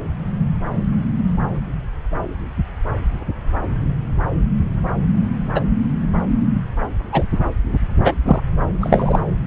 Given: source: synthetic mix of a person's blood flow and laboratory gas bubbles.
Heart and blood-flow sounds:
Doppler ultrasound of blood flow; subclavian vein
5.54-5.61 s: bubbles
7.12-7.23 s: bubbles
8.04-8.13 s: bubbles
8.25-8.41 s: bubbles
8.80-9.20 s: bubbles
From the record:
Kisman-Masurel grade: 123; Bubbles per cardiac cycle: 1 to 2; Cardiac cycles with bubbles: 10 to 50%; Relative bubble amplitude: loud (0.450 to 0.775); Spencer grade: 2 (many but less than half of the cardiac periods contain bubble signals, singularly or in groups); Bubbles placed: anywhere in the cardiac cycle

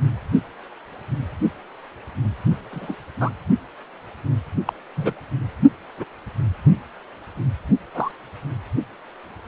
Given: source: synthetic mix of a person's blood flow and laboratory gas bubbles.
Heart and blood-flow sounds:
Doppler ultrasound of blood flow; precordium
2.71-2.94 s: bubbles
3.20-3.29 s: bubbles
4.65-4.73 s: bubbles
4.96-5.13 s: bubbles
5.97-6.04 s: bubbles
7.94-8.11 s: bubbles
From the record:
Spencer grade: 2 (many but less than half of the cardiac periods contain bubble signals, singularly or in groups); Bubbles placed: only in the low amplitude regions of the cardiac cycle

